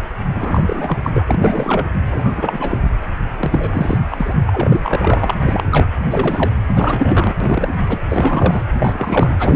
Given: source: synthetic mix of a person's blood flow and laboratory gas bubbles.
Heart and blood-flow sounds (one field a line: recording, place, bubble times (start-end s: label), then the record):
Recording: Doppler ultrasound of blood flow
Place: precordium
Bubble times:
0.35-0.97 s: bubbles
1.03-1.10 s: bubbles
1.14-1.87 s: bubbles
2.10-2.80 s: bubbles
3.39-3.98 s: bubbles
4.10-4.35 s: bubbles
4.46-5.34 s: bubbles
5.42-5.67 s: bubbles
5.71-5.86 s: bubbles
6.10-6.50 s: bubbles
6.68-7.35 s: bubbles
7.40-7.77 s: bubbles
7.87-7.99 s: bubbles
8.10-8.64 s: bubbles
8.79-9.56 s: bubbles
From the record:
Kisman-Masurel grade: 342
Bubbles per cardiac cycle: rolling drumbeat, 9 or more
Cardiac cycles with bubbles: 100%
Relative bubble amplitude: moderate (0.250 to 0.450)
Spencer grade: 3 (all of the cardiac periods contain showers or single bubble signals, but not dominating or overriding the cardiac motion signals)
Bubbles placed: anywhere in the cardiac cycle